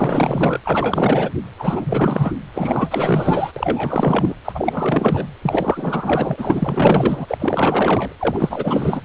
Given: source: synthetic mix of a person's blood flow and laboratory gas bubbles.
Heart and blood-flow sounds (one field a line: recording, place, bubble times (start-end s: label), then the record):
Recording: Doppler ultrasound of blood flow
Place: precordium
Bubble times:
0.00-0.60 s: bubbles
0.64-1.31 s: bubbles
1.59-2.34 s: bubbles
2.53-3.52 s: bubbles
3.56-4.34 s: bubbles
4.45-5.27 s: bubbles
5.42-8.13 s: bubbles
8.19-9.01 s: bubbles
From the record:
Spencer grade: 4 (maximum detectable bubble signal sounding continuously throughout systole and diastole of every cardiac period, and overriding the amplitude of the normal cardiac signals)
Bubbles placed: anywhere in the cardiac cycle